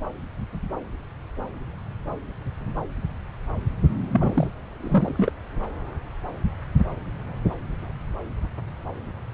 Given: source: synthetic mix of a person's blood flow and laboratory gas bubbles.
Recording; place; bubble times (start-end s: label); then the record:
Doppler ultrasound of blood flow; subclavian vein
4.11-4.50 s: bubbles
4.80-5.32 s: bubbles
From the record:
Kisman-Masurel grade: 212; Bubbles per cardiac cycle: several, 3 to 8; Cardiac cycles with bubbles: 1 to 10%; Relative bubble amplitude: moderate (0.250 to 0.450); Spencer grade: 1 (occasional bubble signal discernible with the cardiac motion signal, with majority of cardiac periods free of bubbles); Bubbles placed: anywhere in the cardiac cycle